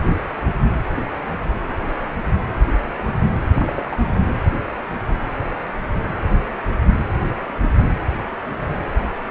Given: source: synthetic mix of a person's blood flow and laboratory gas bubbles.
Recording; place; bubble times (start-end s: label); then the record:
Doppler ultrasound of blood flow; precordium
3.54-3.85 s: bubbles
3.91-4.25 s: bubbles
From the record:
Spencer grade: 1 (occasional bubble signal discernible with the cardiac motion signal, with majority of cardiac periods free of bubbles); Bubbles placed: anywhere in the cardiac cycle